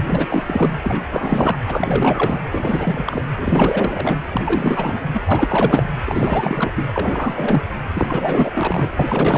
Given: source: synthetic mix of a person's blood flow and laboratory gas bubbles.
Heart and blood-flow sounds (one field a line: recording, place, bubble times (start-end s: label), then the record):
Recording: Doppler ultrasound of blood flow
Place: precordium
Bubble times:
0.00-0.78 s: bubbles
0.83-1.58 s: bubbles
1.68-2.43 s: bubbles
2.52-3.25 s: bubbles
3.37-4.17 s: bubbles
4.31-4.98 s: bubbles
5.13-5.93 s: bubbles
6.04-6.86 s: bubbles
6.92-7.63 s: bubbles
7.93-8.91 s: bubbles
8.99-9.38 s: bubbles
From the record:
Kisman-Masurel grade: 444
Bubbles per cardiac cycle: continuous sound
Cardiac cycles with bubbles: 100%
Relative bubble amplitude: maximal (0.775 to 0.999)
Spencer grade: 4 (maximum detectable bubble signal sounding continuously throughout systole and diastole of every cardiac period, and overriding the amplitude of the normal cardiac signals)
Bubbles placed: anywhere in the cardiac cycle